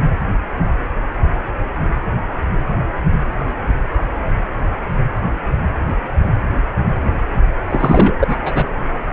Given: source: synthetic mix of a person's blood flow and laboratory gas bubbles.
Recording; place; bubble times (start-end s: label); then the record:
Doppler ultrasound of blood flow; precordium
7.70-8.17 s: bubbles
8.19-8.37 s: bubbles
8.42-8.66 s: bubbles
From the record:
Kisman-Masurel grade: 213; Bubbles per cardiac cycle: several, 3 to 8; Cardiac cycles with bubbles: 1 to 10%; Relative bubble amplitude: loud (0.450 to 0.775); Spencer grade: 1 (occasional bubble signal discernible with the cardiac motion signal, with majority of cardiac periods free of bubbles); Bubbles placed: anywhere in the cardiac cycle